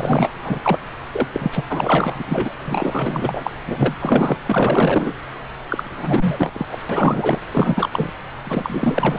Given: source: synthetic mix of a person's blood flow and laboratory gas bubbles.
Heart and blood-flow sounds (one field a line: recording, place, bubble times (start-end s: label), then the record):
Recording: Doppler ultrasound of blood flow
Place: subclavian vein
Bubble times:
0.00-0.31 s: bubbles
0.43-0.79 s: bubbles
1.12-1.27 s: bubbles
1.33-1.64 s: bubbles
1.69-2.25 s: bubbles
2.27-2.54 s: bubbles
2.60-3.51 s: bubbles
3.67-3.95 s: bubbles
4.00-4.37 s: bubbles
4.42-5.13 s: bubbles
5.68-6.66 s: bubbles
6.71-6.79 s: bubbles
6.89-7.38 s: bubbles
7.52-7.90 s: bubbles
7.92-8.10 s: bubbles
8.44-9.19 s: bubbles
From the record:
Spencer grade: 4 (maximum detectable bubble signal sounding continuously throughout systole and diastole of every cardiac period, and overriding the amplitude of the normal cardiac signals)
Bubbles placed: anywhere in the cardiac cycle